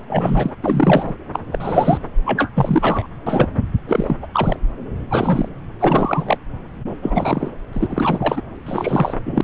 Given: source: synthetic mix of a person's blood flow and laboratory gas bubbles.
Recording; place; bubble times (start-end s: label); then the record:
Doppler ultrasound of blood flow; subclavian vein
0.07-0.54 s: bubbles
0.62-1.13 s: bubbles
1.33-1.41 s: bubbles
1.52-2.04 s: bubbles
2.25-2.50 s: bubbles
2.54-3.07 s: bubbles
3.27-3.48 s: bubbles
3.88-4.17 s: bubbles
4.22-4.28 s: bubbles
4.33-4.59 s: bubbles
5.10-5.57 s: bubbles
5.79-6.37 s: bubbles
7.02-7.51 s: bubbles
7.72-8.41 s: bubbles
8.66-9.14 s: bubbles
9.25-9.41 s: bubbles
From the record:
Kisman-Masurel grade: 333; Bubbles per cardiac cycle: rolling drumbeat, 9 or more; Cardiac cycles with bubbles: 50 to 99%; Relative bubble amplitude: loud (0.450 to 0.775); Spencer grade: 3 (all of the cardiac periods contain showers or single bubble signals, but not dominating or overriding the cardiac motion signals); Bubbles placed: anywhere in the cardiac cycle